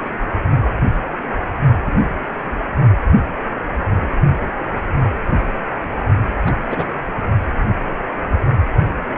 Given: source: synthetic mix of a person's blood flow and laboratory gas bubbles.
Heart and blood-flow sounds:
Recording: Doppler ultrasound of blood flow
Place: precordium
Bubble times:
1.85-1.93 s: bubbles
6.46-6.53 s: bubbles
6.70-6.85 s: bubbles
From the record:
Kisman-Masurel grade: 122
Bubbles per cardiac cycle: 1 to 2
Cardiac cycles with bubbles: 10 to 50%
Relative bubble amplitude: moderate (0.250 to 0.450)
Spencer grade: 2 (many but less than half of the cardiac periods contain bubble signals, singularly or in groups)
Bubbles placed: only in the low amplitude regions of the cardiac cycle

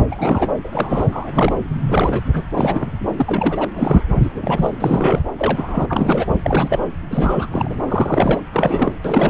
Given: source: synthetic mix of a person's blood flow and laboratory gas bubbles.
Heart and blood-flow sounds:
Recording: Doppler ultrasound of blood flow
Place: subclavian vein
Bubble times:
0.00-0.03 s: bubbles
0.11-0.47 s: bubbles
0.64-1.53 s: bubbles
1.80-2.22 s: bubbles
2.33-2.43 s: bubbles
2.58-2.91 s: bubbles
3.17-3.65 s: bubbles
3.73-4.03 s: bubbles
4.23-4.29 s: bubbles
4.33-4.72 s: bubbles
4.80-5.22 s: bubbles
5.38-5.86 s: bubbles
5.89-6.26 s: bubbles
6.44-6.79 s: bubbles
7.10-7.48 s: bubbles
7.51-7.76 s: bubbles
7.88-8.41 s: bubbles
8.53-8.96 s: bubbles
9.04-9.30 s: bubbles
From the record:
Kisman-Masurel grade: 342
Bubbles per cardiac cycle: rolling drumbeat, 9 or more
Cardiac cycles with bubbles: 100%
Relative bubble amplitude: moderate (0.250 to 0.450)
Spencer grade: 3 (all of the cardiac periods contain showers or single bubble signals, but not dominating or overriding the cardiac motion signals)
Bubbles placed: anywhere in the cardiac cycle

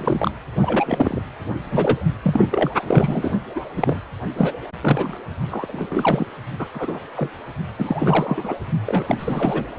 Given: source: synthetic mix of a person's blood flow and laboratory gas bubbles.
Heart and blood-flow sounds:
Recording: Doppler ultrasound of blood flow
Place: precordium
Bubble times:
0.00-0.31 s: bubbles
0.61-1.22 s: bubbles
1.71-2.07 s: bubbles
2.23-2.47 s: bubbles
2.51-2.70 s: bubbles
2.87-3.36 s: bubbles
3.56-3.60 s: bubbles
3.76-4.00 s: bubbles
4.38-4.53 s: bubbles
4.81-5.17 s: bubbles
5.50-6.27 s: bubbles
6.59-6.66 s: bubbles
6.74-7.00 s: bubbles
7.15-7.31 s: bubbles
7.79-8.58 s: bubbles
8.86-9.65 s: bubbles
From the record:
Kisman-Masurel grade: 342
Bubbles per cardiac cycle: rolling drumbeat, 9 or more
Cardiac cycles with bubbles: 100%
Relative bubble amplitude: moderate (0.250 to 0.450)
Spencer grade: 3 (all of the cardiac periods contain showers or single bubble signals, but not dominating or overriding the cardiac motion signals)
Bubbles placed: only in the low amplitude regions of the cardiac cycle

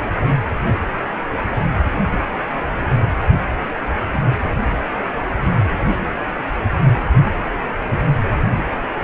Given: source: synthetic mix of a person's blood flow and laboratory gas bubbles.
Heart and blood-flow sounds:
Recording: Doppler ultrasound of blood flow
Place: precordium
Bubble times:
4.86-4.90 s: bubbles
From the record:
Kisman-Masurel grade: 121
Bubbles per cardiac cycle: 1 to 2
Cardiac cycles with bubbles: 10 to 50%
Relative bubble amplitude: barely perceptible (0.100 to 0.250)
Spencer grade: 2 (many but less than half of the cardiac periods contain bubble signals, singularly or in groups)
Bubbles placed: anywhere in the cardiac cycle

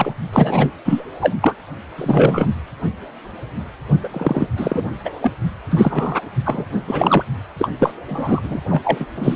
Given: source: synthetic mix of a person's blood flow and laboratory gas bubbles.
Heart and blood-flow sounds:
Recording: Doppler ultrasound of blood flow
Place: precordium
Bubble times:
0.00-0.11 s: bubbles
0.33-0.71 s: bubbles
0.85-1.04 s: bubbles
1.21-1.36 s: bubbles
1.42-1.55 s: bubbles
1.98-2.47 s: bubbles
4.03-4.09 s: bubbles
4.13-4.47 s: bubbles
4.57-4.87 s: bubbles
5.04-5.11 s: bubbles
5.21-5.32 s: bubbles
5.70-6.20 s: bubbles
6.45-6.65 s: bubbles
6.87-7.24 s: bubbles
7.59-7.69 s: bubbles
7.79-7.92 s: bubbles
8.09-8.41 s: bubbles
8.44-8.61 s: bubbles
8.69-8.81 s: bubbles
8.84-9.05 s: bubbles
9.17-9.36 s: bubbles
From the record:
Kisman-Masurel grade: 333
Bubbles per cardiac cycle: rolling drumbeat, 9 or more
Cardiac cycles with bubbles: 50 to 99%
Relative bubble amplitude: loud (0.450 to 0.775)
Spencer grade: 3 (all of the cardiac periods contain showers or single bubble signals, but not dominating or overriding the cardiac motion signals)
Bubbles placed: anywhere in the cardiac cycle

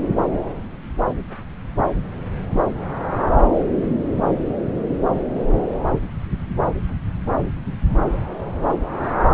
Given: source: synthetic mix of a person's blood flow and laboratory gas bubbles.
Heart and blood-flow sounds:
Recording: Doppler ultrasound of blood flow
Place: subclavian vein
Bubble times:
9.31-9.34 s: bubbles
From the record:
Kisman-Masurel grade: 213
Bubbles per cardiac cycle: several, 3 to 8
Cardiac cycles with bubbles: 1 to 10%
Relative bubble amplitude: loud (0.450 to 0.775)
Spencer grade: 1 (occasional bubble signal discernible with the cardiac motion signal, with majority of cardiac periods free of bubbles)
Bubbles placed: anywhere in the cardiac cycle

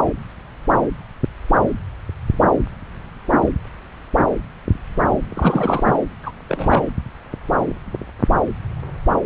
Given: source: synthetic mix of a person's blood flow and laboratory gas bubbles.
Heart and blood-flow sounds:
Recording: Doppler ultrasound of blood flow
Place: subclavian vein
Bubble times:
0.05-0.10 s: bubbles
5.29-5.84 s: bubbles
5.87-5.98 s: bubbles
6.23-6.32 s: bubbles
6.49-6.82 s: bubbles
From the record:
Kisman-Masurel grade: 222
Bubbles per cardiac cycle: several, 3 to 8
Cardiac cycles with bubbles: 10 to 50%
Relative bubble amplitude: moderate (0.250 to 0.450)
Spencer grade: 2 (many but less than half of the cardiac periods contain bubble signals, singularly or in groups)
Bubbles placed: anywhere in the cardiac cycle

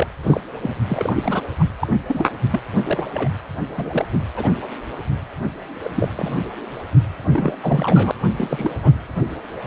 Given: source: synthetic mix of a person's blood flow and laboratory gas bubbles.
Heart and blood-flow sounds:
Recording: Doppler ultrasound of blood flow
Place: precordium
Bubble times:
0.00-0.07 s: bubbles
0.23-0.41 s: bubbles
0.62-0.71 s: bubbles
0.89-1.13 s: bubbles
1.16-1.42 s: bubbles
1.58-1.64 s: bubbles
1.79-1.93 s: bubbles
2.06-2.26 s: bubbles
2.50-2.60 s: bubbles
2.83-3.04 s: bubbles
3.13-3.29 s: bubbles
3.77-4.05 s: bubbles
4.12-4.18 s: bubbles
4.36-4.59 s: bubbles
5.84-5.89 s: bubbles
5.95-6.08 s: bubbles
6.16-6.39 s: bubbles
7.27-7.55 s: bubbles
7.62-8.12 s: bubbles
8.37-8.91 s: bubbles
From the record:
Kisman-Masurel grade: 232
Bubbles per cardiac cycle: several, 3 to 8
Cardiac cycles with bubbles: 50 to 99%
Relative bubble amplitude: moderate (0.250 to 0.450)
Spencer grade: 3 (all of the cardiac periods contain showers or single bubble signals, but not dominating or overriding the cardiac motion signals)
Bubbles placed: anywhere in the cardiac cycle

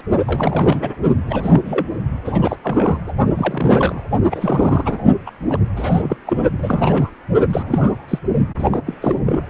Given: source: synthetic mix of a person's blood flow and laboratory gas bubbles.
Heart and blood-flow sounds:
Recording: Doppler ultrasound of blood flow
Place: precordium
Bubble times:
0.27-0.96 s: bubbles
1.27-1.86 s: bubbles
2.24-2.56 s: bubbles
2.63-2.97 s: bubbles
3.06-3.12 s: bubbles
3.36-4.03 s: bubbles
4.31-4.98 s: bubbles
5.25-5.30 s: bubbles
5.49-5.58 s: bubbles
5.77-6.17 s: bubbles
6.26-6.37 s: bubbles
6.58-7.11 s: bubbles
7.49-8.19 s: bubbles
8.58-8.78 s: bubbles
8.86-8.95 s: bubbles
9.02-9.19 s: bubbles
9.26-9.43 s: bubbles
From the record:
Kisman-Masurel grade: 342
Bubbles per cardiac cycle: rolling drumbeat, 9 or more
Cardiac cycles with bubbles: 100%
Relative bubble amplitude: moderate (0.250 to 0.450)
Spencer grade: 3 (all of the cardiac periods contain showers or single bubble signals, but not dominating or overriding the cardiac motion signals)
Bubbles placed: only in the low amplitude regions of the cardiac cycle

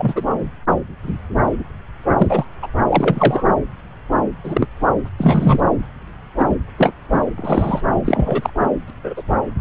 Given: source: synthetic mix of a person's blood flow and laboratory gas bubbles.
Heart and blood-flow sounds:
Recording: Doppler ultrasound of blood flow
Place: subclavian vein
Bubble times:
0.00-0.25 s: bubbles
2.17-2.45 s: bubbles
2.62-2.68 s: bubbles
2.90-3.47 s: bubbles
4.43-4.68 s: bubbles
5.05-5.09 s: bubbles
5.18-5.60 s: bubbles
6.38-6.46 s: bubbles
6.50-6.56 s: bubbles
6.78-6.92 s: bubbles
7.12-7.20 s: bubbles
7.37-7.81 s: bubbles
8.04-8.50 s: bubbles
8.60-8.70 s: bubbles
8.88-8.91 s: bubbles
9.04-9.14 s: bubbles
9.16-9.22 s: bubbles
From the record:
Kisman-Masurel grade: 233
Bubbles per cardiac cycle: several, 3 to 8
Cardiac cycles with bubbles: 50 to 99%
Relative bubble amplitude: loud (0.450 to 0.775)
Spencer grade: 3 (all of the cardiac periods contain showers or single bubble signals, but not dominating or overriding the cardiac motion signals)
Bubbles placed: anywhere in the cardiac cycle

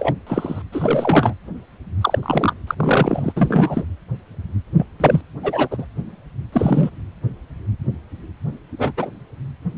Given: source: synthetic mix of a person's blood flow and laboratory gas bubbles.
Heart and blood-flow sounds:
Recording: Doppler ultrasound of blood flow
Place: precordium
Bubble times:
0.00-0.13 s: bubbles
0.27-0.62 s: bubbles
0.72-1.35 s: bubbles
2.01-2.19 s: bubbles
2.22-2.53 s: bubbles
2.67-3.32 s: bubbles
3.35-3.85 s: bubbles
4.77-4.86 s: bubbles
5.00-5.22 s: bubbles
5.43-5.86 s: bubbles
6.52-6.90 s: bubbles
8.78-8.92 s: bubbles
8.97-9.10 s: bubbles
From the record:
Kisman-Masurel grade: 233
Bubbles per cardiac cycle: several, 3 to 8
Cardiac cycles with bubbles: 50 to 99%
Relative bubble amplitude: loud (0.450 to 0.775)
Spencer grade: 3 (all of the cardiac periods contain showers or single bubble signals, but not dominating or overriding the cardiac motion signals)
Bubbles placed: anywhere in the cardiac cycle

